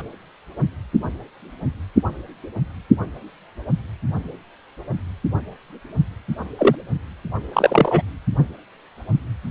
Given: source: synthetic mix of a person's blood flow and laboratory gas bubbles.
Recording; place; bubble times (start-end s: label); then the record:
Doppler ultrasound of blood flow; precordium
6.57-6.75 s: bubbles
7.53-8.02 s: bubbles
From the record:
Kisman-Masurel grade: 123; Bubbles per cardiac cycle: 1 to 2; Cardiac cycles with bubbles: 10 to 50%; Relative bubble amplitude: loud (0.450 to 0.775); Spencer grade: 2 (many but less than half of the cardiac periods contain bubble signals, singularly or in groups); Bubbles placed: only in the low amplitude regions of the cardiac cycle